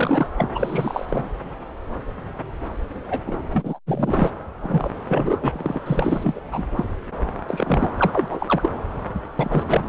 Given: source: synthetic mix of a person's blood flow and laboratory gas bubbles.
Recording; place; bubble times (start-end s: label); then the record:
Doppler ultrasound of blood flow; subclavian vein
0.00-0.27 s: bubbles
0.38-0.50 s: bubbles
0.54-1.05 s: bubbles
1.08-1.30 s: bubbles
3.05-3.22 s: bubbles
3.27-3.39 s: bubbles
3.53-3.79 s: bubbles
3.87-4.30 s: bubbles
4.63-4.89 s: bubbles
5.08-5.79 s: bubbles
5.85-6.41 s: bubbles
6.51-6.63 s: bubbles
6.76-6.85 s: bubbles
7.48-7.90 s: bubbles
7.97-8.69 s: bubbles
9.39-9.63 s: bubbles
9.68-9.84 s: bubbles
From the record:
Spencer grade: 3 (all of the cardiac periods contain showers or single bubble signals, but not dominating or overriding the cardiac motion signals); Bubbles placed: anywhere in the cardiac cycle